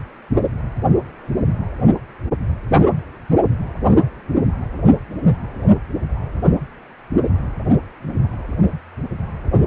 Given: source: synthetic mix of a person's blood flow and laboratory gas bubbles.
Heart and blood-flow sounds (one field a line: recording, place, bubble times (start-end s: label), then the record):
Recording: Doppler ultrasound of blood flow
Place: precordium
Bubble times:
no bubbles
From the record:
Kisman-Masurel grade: 000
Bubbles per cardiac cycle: 0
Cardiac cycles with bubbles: 0%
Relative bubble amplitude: no bubbles discernible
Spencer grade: 0 (complete lack of bubble signals)